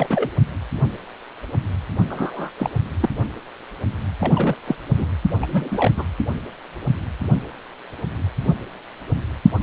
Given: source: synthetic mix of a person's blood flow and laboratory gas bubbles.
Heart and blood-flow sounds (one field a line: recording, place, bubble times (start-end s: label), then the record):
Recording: Doppler ultrasound of blood flow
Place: precordium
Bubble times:
0.00-0.07 s: bubbles
0.10-0.30 s: bubbles
2.10-2.50 s: bubbles
2.58-2.70 s: bubbles
3.00-3.10 s: bubbles
4.20-4.55 s: bubbles
4.67-4.76 s: bubbles
4.98-5.06 s: bubbles
5.42-5.91 s: bubbles
5.96-6.04 s: bubbles
From the record:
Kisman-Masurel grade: 222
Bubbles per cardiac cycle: several, 3 to 8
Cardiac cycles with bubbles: 10 to 50%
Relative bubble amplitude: moderate (0.250 to 0.450)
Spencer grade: 2 (many but less than half of the cardiac periods contain bubble signals, singularly or in groups)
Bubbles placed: anywhere in the cardiac cycle